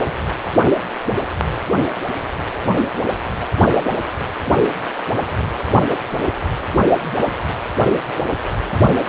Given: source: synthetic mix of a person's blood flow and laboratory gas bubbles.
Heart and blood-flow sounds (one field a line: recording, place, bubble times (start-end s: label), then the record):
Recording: Doppler ultrasound of blood flow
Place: precordium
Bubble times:
no bubbles
From the record:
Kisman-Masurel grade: 000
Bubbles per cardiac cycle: 0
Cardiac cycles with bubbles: 0%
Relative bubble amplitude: no bubbles discernible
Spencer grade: 0 (complete lack of bubble signals)